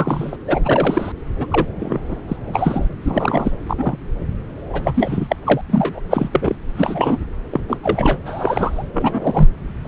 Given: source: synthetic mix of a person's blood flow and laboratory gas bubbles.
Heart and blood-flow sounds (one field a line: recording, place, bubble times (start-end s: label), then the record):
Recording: Doppler ultrasound of blood flow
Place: subclavian vein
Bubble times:
0.00-0.36 s: bubbles
0.47-1.12 s: bubbles
1.39-1.47 s: bubbles
1.51-1.67 s: bubbles
1.79-1.99 s: bubbles
2.08-2.17 s: bubbles
2.28-2.37 s: bubbles
2.48-2.86 s: bubbles
3.04-3.52 s: bubbles
3.69-4.10 s: bubbles
4.70-5.36 s: bubbles
5.45-5.61 s: bubbles
5.70-6.01 s: bubbles
6.10-6.56 s: bubbles
6.77-7.18 s: bubbles
7.50-7.61 s: bubbles
7.68-7.80 s: bubbles
7.83-8.17 s: bubbles
8.25-8.83 s: bubbles
8.93-9.49 s: bubbles
9.84-9.88 s: bubbles
From the record:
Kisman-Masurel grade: 242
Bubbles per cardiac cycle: several, 3 to 8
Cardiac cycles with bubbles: 100%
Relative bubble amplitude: moderate (0.250 to 0.450)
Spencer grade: 3 (all of the cardiac periods contain showers or single bubble signals, but not dominating or overriding the cardiac motion signals)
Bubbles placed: anywhere in the cardiac cycle